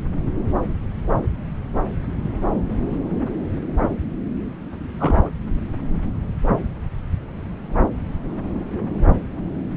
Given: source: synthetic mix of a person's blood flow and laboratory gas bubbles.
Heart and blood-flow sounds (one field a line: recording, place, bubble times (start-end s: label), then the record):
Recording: Doppler ultrasound of blood flow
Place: subclavian vein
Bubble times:
4.99-5.29 s: bubbles
From the record:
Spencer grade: 1 (occasional bubble signal discernible with the cardiac motion signal, with majority of cardiac periods free of bubbles)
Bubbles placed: anywhere in the cardiac cycle